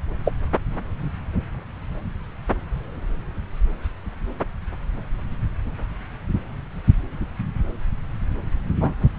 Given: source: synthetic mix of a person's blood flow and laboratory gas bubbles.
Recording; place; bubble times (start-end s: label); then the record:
Doppler ultrasound of blood flow; subclavian vein
0.25-0.33 s: bubbles
8.80-8.93 s: bubbles
From the record:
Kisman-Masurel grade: 123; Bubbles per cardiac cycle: 1 to 2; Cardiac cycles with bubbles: 10 to 50%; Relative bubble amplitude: loud (0.450 to 0.775); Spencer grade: 2 (many but less than half of the cardiac periods contain bubble signals, singularly or in groups); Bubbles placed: anywhere in the cardiac cycle